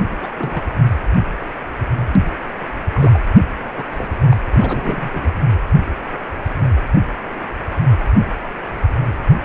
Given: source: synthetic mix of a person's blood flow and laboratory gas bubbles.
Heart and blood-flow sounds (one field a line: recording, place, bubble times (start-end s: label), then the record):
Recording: Doppler ultrasound of blood flow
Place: precordium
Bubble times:
0.12-0.30 s: bubbles
0.36-0.62 s: bubbles
2.94-3.19 s: bubbles
3.77-3.85 s: bubbles
3.91-4.08 s: bubbles
4.29-4.37 s: bubbles
4.52-5.31 s: bubbles
From the record:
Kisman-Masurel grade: 221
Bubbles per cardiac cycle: several, 3 to 8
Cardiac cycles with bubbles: 10 to 50%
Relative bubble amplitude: barely perceptible (0.100 to 0.250)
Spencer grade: 2 (many but less than half of the cardiac periods contain bubble signals, singularly or in groups)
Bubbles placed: anywhere in the cardiac cycle